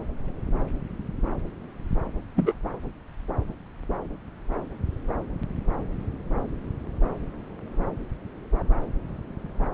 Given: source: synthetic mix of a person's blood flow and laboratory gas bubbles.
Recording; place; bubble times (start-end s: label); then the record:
Doppler ultrasound of blood flow; subclavian vein
2.36-2.54 s: bubbles
From the record:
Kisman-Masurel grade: 112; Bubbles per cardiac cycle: 1 to 2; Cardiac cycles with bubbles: 1 to 10%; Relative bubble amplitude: moderate (0.250 to 0.450); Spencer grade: 1 (occasional bubble signal discernible with the cardiac motion signal, with majority of cardiac periods free of bubbles); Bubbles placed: anywhere in the cardiac cycle